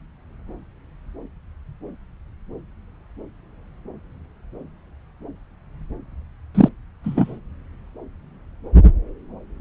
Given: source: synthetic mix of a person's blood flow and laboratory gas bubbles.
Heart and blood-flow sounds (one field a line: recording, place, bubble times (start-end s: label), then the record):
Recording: Doppler ultrasound of blood flow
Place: subclavian vein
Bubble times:
6.54-6.68 s: bubbles
7.04-7.39 s: bubbles
From the record:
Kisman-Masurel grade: 113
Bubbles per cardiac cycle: 1 to 2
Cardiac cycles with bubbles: 1 to 10%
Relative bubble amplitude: loud (0.450 to 0.775)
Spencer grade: 1 (occasional bubble signal discernible with the cardiac motion signal, with majority of cardiac periods free of bubbles)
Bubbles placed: anywhere in the cardiac cycle